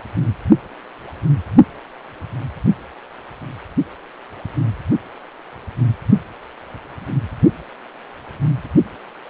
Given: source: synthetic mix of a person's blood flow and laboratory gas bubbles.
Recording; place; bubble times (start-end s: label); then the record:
Doppler ultrasound of blood flow; precordium
no bubbles
From the record:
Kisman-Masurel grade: 000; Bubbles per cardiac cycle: 0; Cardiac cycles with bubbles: 0%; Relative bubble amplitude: no bubbles discernible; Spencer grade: 0 (complete lack of bubble signals)